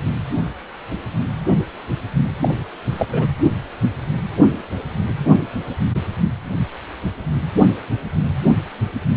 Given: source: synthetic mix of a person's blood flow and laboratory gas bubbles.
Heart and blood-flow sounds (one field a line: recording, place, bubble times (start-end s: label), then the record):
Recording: Doppler ultrasound of blood flow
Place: precordium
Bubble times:
2.42-2.49 s: bubbles
2.90-3.06 s: bubbles
3.12-3.27 s: bubbles
From the record:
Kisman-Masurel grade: 212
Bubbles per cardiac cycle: several, 3 to 8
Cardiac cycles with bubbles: 1 to 10%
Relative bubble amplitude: moderate (0.250 to 0.450)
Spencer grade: 1 (occasional bubble signal discernible with the cardiac motion signal, with majority of cardiac periods free of bubbles)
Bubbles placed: anywhere in the cardiac cycle